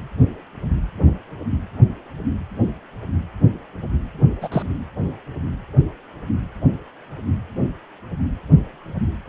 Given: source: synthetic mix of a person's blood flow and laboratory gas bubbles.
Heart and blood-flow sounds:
Doppler ultrasound of blood flow; precordium
4.42-4.48 s: bubbles
4.51-4.62 s: bubbles
From the record:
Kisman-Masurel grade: 112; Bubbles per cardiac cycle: 1 to 2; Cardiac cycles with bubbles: 1 to 10%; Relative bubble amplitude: moderate (0.250 to 0.450); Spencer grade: 1 (occasional bubble signal discernible with the cardiac motion signal, with majority of cardiac periods free of bubbles); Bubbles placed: anywhere in the cardiac cycle

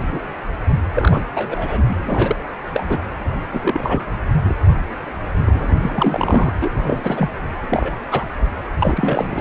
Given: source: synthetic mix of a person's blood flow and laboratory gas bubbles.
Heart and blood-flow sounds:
Doppler ultrasound of blood flow; precordium
0.00-0.20 s: bubbles
0.95-1.22 s: bubbles
1.34-1.95 s: bubbles
2.05-2.36 s: bubbles
2.74-3.01 s: bubbles
3.53-4.04 s: bubbles
4.45-4.54 s: bubbles
5.46-6.52 s: bubbles
6.61-6.70 s: bubbles
6.74-7.29 s: bubbles
7.68-7.91 s: bubbles
8.11-8.24 s: bubbles
8.80-9.41 s: bubbles
From the record:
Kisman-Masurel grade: 242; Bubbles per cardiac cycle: several, 3 to 8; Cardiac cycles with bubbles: 100%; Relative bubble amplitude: moderate (0.250 to 0.450); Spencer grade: 3 (all of the cardiac periods contain showers or single bubble signals, but not dominating or overriding the cardiac motion signals); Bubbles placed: anywhere in the cardiac cycle

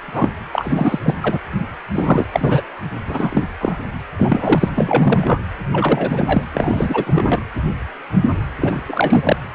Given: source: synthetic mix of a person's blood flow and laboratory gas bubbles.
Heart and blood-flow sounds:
Doppler ultrasound of blood flow; precordium
0.05-0.43 s: bubbles
0.53-0.99 s: bubbles
1.02-1.14 s: bubbles
1.22-1.39 s: bubbles
1.95-2.26 s: bubbles
2.32-2.62 s: bubbles
3.06-3.44 s: bubbles
3.60-3.75 s: bubbles
4.17-4.69 s: bubbles
4.75-5.44 s: bubbles
5.73-6.46 s: bubbles
6.54-7.42 s: bubbles
8.58-8.80 s: bubbles
8.87-9.36 s: bubbles
From the record:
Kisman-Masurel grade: 333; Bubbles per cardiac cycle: rolling drumbeat, 9 or more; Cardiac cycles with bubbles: 50 to 99%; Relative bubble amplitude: loud (0.450 to 0.775); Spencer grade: 3 (all of the cardiac periods contain showers or single bubble signals, but not dominating or overriding the cardiac motion signals); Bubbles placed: anywhere in the cardiac cycle

